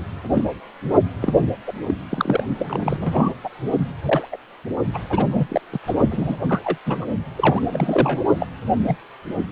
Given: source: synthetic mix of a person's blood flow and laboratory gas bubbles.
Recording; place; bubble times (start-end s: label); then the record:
Doppler ultrasound of blood flow; precordium
0.32-0.43 s: bubbles
1.20-1.33 s: bubbles
1.67-1.72 s: bubbles
1.87-1.94 s: bubbles
2.09-2.43 s: bubbles
2.58-3.34 s: bubbles
3.43-3.49 s: bubbles
4.02-4.29 s: bubbles
4.31-4.36 s: bubbles
4.93-4.98 s: bubbles
5.10-5.61 s: bubbles
5.72-5.79 s: bubbles
5.86-5.94 s: bubbles
6.10-6.37 s: bubbles
6.48-6.60 s: bubbles
6.64-6.77 s: bubbles
6.86-7.06 s: bubbles
7.36-8.21 s: bubbles
8.40-8.47 s: bubbles
8.88-8.96 s: bubbles
From the record:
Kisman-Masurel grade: 243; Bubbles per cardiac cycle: several, 3 to 8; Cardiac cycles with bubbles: 100%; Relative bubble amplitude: loud (0.450 to 0.775); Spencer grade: 3 (all of the cardiac periods contain showers or single bubble signals, but not dominating or overriding the cardiac motion signals); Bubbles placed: only in the low amplitude regions of the cardiac cycle